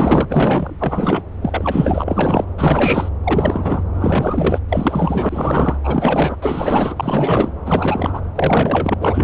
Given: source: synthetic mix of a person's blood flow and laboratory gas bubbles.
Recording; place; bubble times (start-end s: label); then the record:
Doppler ultrasound of blood flow; subclavian vein
0.00-0.27 s: bubbles
0.29-1.23 s: bubbles
1.42-2.45 s: bubbles
2.58-3.09 s: bubbles
3.23-3.83 s: bubbles
3.94-4.59 s: bubbles
4.69-5.77 s: bubbles
5.83-6.36 s: bubbles
6.42-7.51 s: bubbles
7.65-8.21 s: bubbles
8.35-8.94 s: bubbles
8.99-9.24 s: bubbles
From the record:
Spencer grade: 4 (maximum detectable bubble signal sounding continuously throughout systole and diastole of every cardiac period, and overriding the amplitude of the normal cardiac signals); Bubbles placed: anywhere in the cardiac cycle